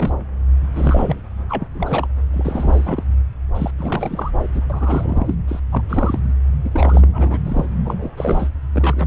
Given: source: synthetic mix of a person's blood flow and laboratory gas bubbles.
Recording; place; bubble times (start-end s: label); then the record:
Doppler ultrasound of blood flow; subclavian vein
0.00-0.15 s: bubbles
0.75-1.20 s: bubbles
1.49-1.68 s: bubbles
1.75-2.07 s: bubbles
2.33-3.03 s: bubbles
3.54-3.71 s: bubbles
3.78-4.31 s: bubbles
4.54-4.62 s: bubbles
4.69-5.34 s: bubbles
5.47-5.60 s: bubbles
5.71-5.82 s: bubbles
5.89-6.19 s: bubbles
6.64-7.39 s: bubbles
7.45-7.66 s: bubbles
7.85-8.12 s: bubbles
8.17-8.50 s: bubbles
8.72-9.07 s: bubbles
From the record:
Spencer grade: 3 (all of the cardiac periods contain showers or single bubble signals, but not dominating or overriding the cardiac motion signals); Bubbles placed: anywhere in the cardiac cycle